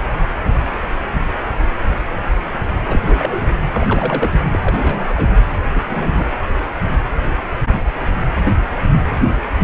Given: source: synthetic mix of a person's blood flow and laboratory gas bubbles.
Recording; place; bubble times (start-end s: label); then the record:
Doppler ultrasound of blood flow; precordium
2.87-3.00 s: bubbles
3.04-3.46 s: bubbles
3.72-4.33 s: bubbles
4.52-4.60 s: bubbles
4.62-5.29 s: bubbles
5.75-5.83 s: bubbles
5.89-6.29 s: bubbles
From the record:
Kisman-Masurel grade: 222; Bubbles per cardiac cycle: several, 3 to 8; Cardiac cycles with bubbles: 10 to 50%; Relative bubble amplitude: moderate (0.250 to 0.450); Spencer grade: 2 (many but less than half of the cardiac periods contain bubble signals, singularly or in groups); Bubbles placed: anywhere in the cardiac cycle